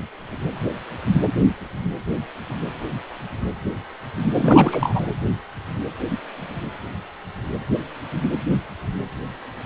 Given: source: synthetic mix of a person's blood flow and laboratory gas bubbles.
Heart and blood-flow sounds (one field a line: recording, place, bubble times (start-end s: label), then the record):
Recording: Doppler ultrasound of blood flow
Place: precordium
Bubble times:
4.36-5.06 s: bubbles
From the record:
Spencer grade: 1 (occasional bubble signal discernible with the cardiac motion signal, with majority of cardiac periods free of bubbles)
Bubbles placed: anywhere in the cardiac cycle